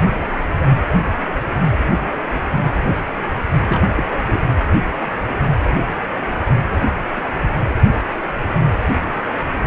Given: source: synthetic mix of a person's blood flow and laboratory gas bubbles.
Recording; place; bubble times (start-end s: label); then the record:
Doppler ultrasound of blood flow; precordium
3.68-3.88 s: bubbles
3.97-4.03 s: bubbles
4.27-4.42 s: bubbles
From the record:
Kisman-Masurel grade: 222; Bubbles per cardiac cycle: several, 3 to 8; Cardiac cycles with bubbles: 10 to 50%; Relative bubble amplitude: moderate (0.250 to 0.450); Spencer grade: 2 (many but less than half of the cardiac periods contain bubble signals, singularly or in groups); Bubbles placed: anywhere in the cardiac cycle